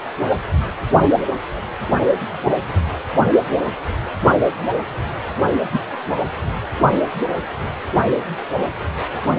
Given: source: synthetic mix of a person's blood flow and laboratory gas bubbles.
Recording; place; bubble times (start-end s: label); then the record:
Doppler ultrasound of blood flow; precordium
5.72-5.79 s: bubbles
From the record:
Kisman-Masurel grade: 113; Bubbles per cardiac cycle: 1 to 2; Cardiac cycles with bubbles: 1 to 10%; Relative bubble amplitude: loud (0.450 to 0.775); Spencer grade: 1 (occasional bubble signal discernible with the cardiac motion signal, with majority of cardiac periods free of bubbles); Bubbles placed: only in the low amplitude regions of the cardiac cycle